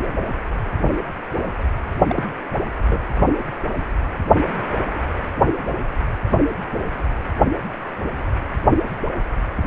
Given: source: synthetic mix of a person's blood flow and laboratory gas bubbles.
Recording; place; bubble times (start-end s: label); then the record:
Doppler ultrasound of blood flow; precordium
2.07-2.23 s: bubbles
2.86-3.00 s: bubbles
From the record:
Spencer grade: 1 (occasional bubble signal discernible with the cardiac motion signal, with majority of cardiac periods free of bubbles); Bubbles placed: only in the low amplitude regions of the cardiac cycle